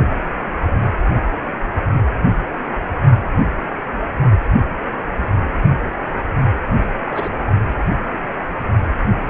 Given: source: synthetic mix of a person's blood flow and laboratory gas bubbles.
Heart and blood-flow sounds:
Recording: Doppler ultrasound of blood flow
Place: precordium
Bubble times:
7.06-7.31 s: bubbles
From the record:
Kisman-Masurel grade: 221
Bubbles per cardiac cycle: several, 3 to 8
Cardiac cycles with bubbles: 10 to 50%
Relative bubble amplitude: barely perceptible (0.100 to 0.250)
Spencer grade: 2 (many but less than half of the cardiac periods contain bubble signals, singularly or in groups)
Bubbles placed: only in the low amplitude regions of the cardiac cycle

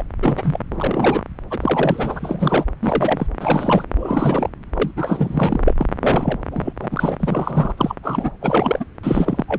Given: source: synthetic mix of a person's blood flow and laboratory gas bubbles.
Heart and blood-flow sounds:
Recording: Doppler ultrasound of blood flow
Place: subclavian vein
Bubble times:
0.00-0.03 s: bubbles
0.19-0.60 s: bubbles
0.71-1.22 s: bubbles
1.50-2.65 s: bubbles
2.82-3.27 s: bubbles
3.40-3.84 s: bubbles
3.99-4.50 s: bubbles
4.73-4.91 s: bubbles
4.96-5.61 s: bubbles
5.67-5.75 s: bubbles
5.77-5.86 s: bubbles
6.00-6.38 s: bubbles
6.51-6.72 s: bubbles
6.79-7.16 s: bubbles
7.20-7.74 s: bubbles
7.78-7.95 s: bubbles
8.03-8.30 s: bubbles
8.40-8.84 s: bubbles
9.03-9.44 s: bubbles
9.48-9.59 s: bubbles
From the record:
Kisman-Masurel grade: 343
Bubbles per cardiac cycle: rolling drumbeat, 9 or more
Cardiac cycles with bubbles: 100%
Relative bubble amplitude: loud (0.450 to 0.775)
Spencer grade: 3 (all of the cardiac periods contain showers or single bubble signals, but not dominating or overriding the cardiac motion signals)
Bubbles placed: anywhere in the cardiac cycle

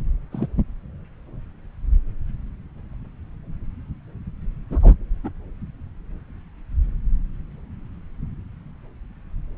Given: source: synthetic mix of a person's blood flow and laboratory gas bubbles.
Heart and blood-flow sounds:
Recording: Doppler ultrasound of blood flow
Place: subclavian vein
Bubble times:
0.32-0.47 s: bubbles
4.70-4.79 s: bubbles
4.82-4.94 s: bubbles
5.24-5.30 s: bubbles
From the record:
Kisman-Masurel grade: 121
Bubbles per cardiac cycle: 1 to 2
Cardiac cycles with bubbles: 10 to 50%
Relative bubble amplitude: barely perceptible (0.100 to 0.250)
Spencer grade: 2 (many but less than half of the cardiac periods contain bubble signals, singularly or in groups)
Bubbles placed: anywhere in the cardiac cycle

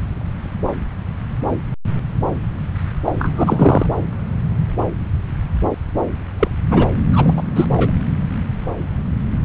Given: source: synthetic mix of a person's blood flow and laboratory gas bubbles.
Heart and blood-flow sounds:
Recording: Doppler ultrasound of blood flow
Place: subclavian vein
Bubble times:
3.04-3.12 s: bubbles
3.19-3.86 s: bubbles
6.40-6.48 s: bubbles
6.71-6.87 s: bubbles
7.12-7.43 s: bubbles
7.55-7.67 s: bubbles
7.76-7.91 s: bubbles
From the record:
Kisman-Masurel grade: 223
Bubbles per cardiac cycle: several, 3 to 8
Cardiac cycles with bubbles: 10 to 50%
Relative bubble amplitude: loud (0.450 to 0.775)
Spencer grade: 2 (many but less than half of the cardiac periods contain bubble signals, singularly or in groups)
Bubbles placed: anywhere in the cardiac cycle

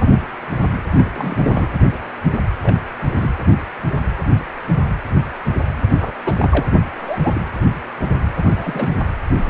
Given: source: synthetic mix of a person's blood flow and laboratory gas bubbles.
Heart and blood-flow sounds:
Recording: Doppler ultrasound of blood flow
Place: precordium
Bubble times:
0.96-1.05 s: bubbles
1.12-1.67 s: bubbles
2.61-2.76 s: bubbles
3.17-3.31 s: bubbles
6.00-6.12 s: bubbles
6.24-6.67 s: bubbles
6.97-7.42 s: bubbles
8.38-8.96 s: bubbles
From the record:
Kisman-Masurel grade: 221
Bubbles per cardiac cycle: several, 3 to 8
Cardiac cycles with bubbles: 10 to 50%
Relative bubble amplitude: barely perceptible (0.100 to 0.250)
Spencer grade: 2 (many but less than half of the cardiac periods contain bubble signals, singularly or in groups)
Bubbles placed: anywhere in the cardiac cycle

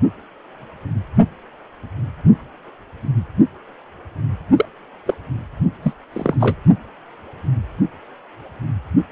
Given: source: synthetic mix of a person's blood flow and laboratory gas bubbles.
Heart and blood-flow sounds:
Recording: Doppler ultrasound of blood flow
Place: precordium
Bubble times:
4.56-4.66 s: bubbles
5.06-5.14 s: bubbles
5.83-5.93 s: bubbles
6.12-6.35 s: bubbles
6.40-6.56 s: bubbles
From the record:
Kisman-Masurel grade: 222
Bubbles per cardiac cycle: several, 3 to 8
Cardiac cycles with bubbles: 10 to 50%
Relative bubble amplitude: moderate (0.250 to 0.450)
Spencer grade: 2 (many but less than half of the cardiac periods contain bubble signals, singularly or in groups)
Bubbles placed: only in the low amplitude regions of the cardiac cycle

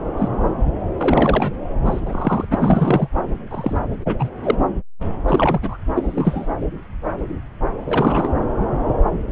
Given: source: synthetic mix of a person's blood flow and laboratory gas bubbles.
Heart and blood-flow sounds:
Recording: Doppler ultrasound of blood flow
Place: subclavian vein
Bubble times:
0.16-0.29 s: bubbles
0.98-1.57 s: bubbles
1.85-2.01 s: bubbles
2.05-2.44 s: bubbles
2.50-3.08 s: bubbles
3.50-3.77 s: bubbles
4.05-4.29 s: bubbles
4.43-4.54 s: bubbles
5.28-5.78 s: bubbles
5.95-6.46 s: bubbles
7.85-8.30 s: bubbles
9.30-9.32 s: bubbles
From the record:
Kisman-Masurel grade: 233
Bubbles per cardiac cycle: several, 3 to 8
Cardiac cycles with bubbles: 50 to 99%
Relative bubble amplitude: loud (0.450 to 0.775)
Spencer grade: 3 (all of the cardiac periods contain showers or single bubble signals, but not dominating or overriding the cardiac motion signals)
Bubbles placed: anywhere in the cardiac cycle

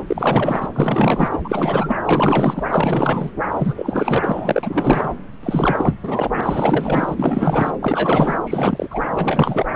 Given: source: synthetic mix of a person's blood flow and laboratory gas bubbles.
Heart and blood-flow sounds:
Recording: Doppler ultrasound of blood flow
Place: subclavian vein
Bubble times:
0.07-0.68 s: bubbles
0.73-1.40 s: bubbles
1.44-1.96 s: bubbles
2.05-2.63 s: bubbles
2.69-3.30 s: bubbles
3.54-5.12 s: bubbles
5.43-5.94 s: bubbles
6.03-6.30 s: bubbles
6.33-7.76 s: bubbles
7.80-8.38 s: bubbles
8.45-9.01 s: bubbles
9.11-9.66 s: bubbles
From the record:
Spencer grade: 4 (maximum detectable bubble signal sounding continuously throughout systole and diastole of every cardiac period, and overriding the amplitude of the normal cardiac signals)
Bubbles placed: anywhere in the cardiac cycle

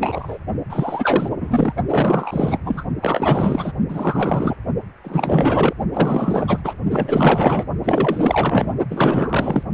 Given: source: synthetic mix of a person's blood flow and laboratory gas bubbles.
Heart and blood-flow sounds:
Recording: Doppler ultrasound of blood flow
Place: precordium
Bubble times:
0.00-0.38 s: bubbles
0.69-1.29 s: bubbles
1.40-1.73 s: bubbles
1.90-2.60 s: bubbles
2.65-2.83 s: bubbles
3.02-3.72 s: bubbles
3.89-4.57 s: bubbles
5.04-5.74 s: bubbles
5.93-6.61 s: bubbles
6.64-6.74 s: bubbles
6.90-7.66 s: bubbles
7.84-8.75 s: bubbles
8.90-9.63 s: bubbles
From the record:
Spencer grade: 4 (maximum detectable bubble signal sounding continuously throughout systole and diastole of every cardiac period, and overriding the amplitude of the normal cardiac signals)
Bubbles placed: only in the low amplitude regions of the cardiac cycle

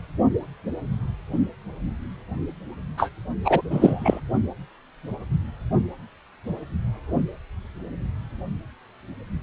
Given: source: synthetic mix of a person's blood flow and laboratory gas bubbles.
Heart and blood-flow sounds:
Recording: Doppler ultrasound of blood flow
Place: precordium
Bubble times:
2.97-3.09 s: bubbles
3.45-3.62 s: bubbles
3.70-4.21 s: bubbles
From the record:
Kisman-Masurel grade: 213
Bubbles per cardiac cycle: several, 3 to 8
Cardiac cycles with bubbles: 1 to 10%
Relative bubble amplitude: loud (0.450 to 0.775)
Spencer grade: 1 (occasional bubble signal discernible with the cardiac motion signal, with majority of cardiac periods free of bubbles)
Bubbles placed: only in the low amplitude regions of the cardiac cycle

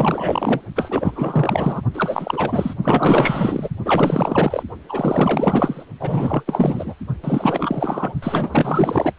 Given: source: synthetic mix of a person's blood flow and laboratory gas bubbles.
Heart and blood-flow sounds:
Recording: Doppler ultrasound of blood flow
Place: precordium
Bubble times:
0.00-0.61 s: bubbles
0.75-1.81 s: bubbles
1.93-2.75 s: bubbles
2.83-3.69 s: bubbles
3.85-4.63 s: bubbles
4.89-5.83 s: bubbles
6.00-6.42 s: bubbles
6.46-6.96 s: bubbles
7.23-8.13 s: bubbles
8.22-9.12 s: bubbles
From the record:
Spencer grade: 4 (maximum detectable bubble signal sounding continuously throughout systole and diastole of every cardiac period, and overriding the amplitude of the normal cardiac signals)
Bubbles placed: only in the low amplitude regions of the cardiac cycle

